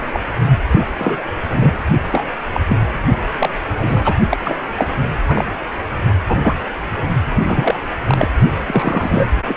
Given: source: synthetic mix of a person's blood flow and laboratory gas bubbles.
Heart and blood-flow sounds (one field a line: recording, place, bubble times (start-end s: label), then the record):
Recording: Doppler ultrasound of blood flow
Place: precordium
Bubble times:
0.13-0.20 s: bubbles
0.71-0.87 s: bubbles
0.98-1.24 s: bubbles
1.49-1.74 s: bubbles
2.12-2.28 s: bubbles
2.54-2.60 s: bubbles
2.67-2.77 s: bubbles
3.39-3.49 s: bubbles
3.73-4.14 s: bubbles
4.30-4.60 s: bubbles
4.75-4.85 s: bubbles
5.26-5.44 s: bubbles
6.27-6.38 s: bubbles
6.42-6.55 s: bubbles
7.42-7.79 s: bubbles
8.06-8.29 s: bubbles
8.67-9.28 s: bubbles
9.47-9.57 s: bubbles
From the record:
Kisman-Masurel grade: 243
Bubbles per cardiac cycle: several, 3 to 8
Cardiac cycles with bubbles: 100%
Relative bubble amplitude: loud (0.450 to 0.775)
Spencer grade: 3 (all of the cardiac periods contain showers or single bubble signals, but not dominating or overriding the cardiac motion signals)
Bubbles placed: only in the low amplitude regions of the cardiac cycle